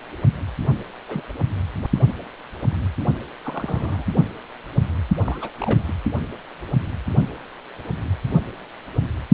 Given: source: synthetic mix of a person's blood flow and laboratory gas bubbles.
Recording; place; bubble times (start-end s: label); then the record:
Doppler ultrasound of blood flow; precordium
1.08-1.23 s: bubbles
3.44-4.04 s: bubbles
5.24-5.53 s: bubbles
5.61-5.95 s: bubbles
From the record:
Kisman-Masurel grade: 221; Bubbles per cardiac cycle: several, 3 to 8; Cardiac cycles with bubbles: 10 to 50%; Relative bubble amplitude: barely perceptible (0.100 to 0.250); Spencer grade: 2 (many but less than half of the cardiac periods contain bubble signals, singularly or in groups); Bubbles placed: only in the low amplitude regions of the cardiac cycle